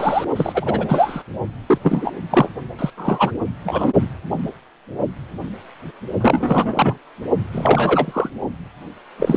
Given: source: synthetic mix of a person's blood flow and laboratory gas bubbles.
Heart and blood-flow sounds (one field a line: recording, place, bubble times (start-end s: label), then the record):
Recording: Doppler ultrasound of blood flow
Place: precordium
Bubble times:
0.00-0.25 s: bubbles
0.36-1.24 s: bubbles
1.67-1.78 s: bubbles
1.83-2.12 s: bubbles
2.30-2.49 s: bubbles
2.78-2.90 s: bubbles
2.97-3.31 s: bubbles
3.64-3.93 s: bubbles
6.20-6.98 s: bubbles
7.53-8.30 s: bubbles
9.17-9.37 s: bubbles
From the record:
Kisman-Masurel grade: 233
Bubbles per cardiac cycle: several, 3 to 8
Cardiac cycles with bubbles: 50 to 99%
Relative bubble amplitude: loud (0.450 to 0.775)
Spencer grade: 3 (all of the cardiac periods contain showers or single bubble signals, but not dominating or overriding the cardiac motion signals)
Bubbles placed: only in the low amplitude regions of the cardiac cycle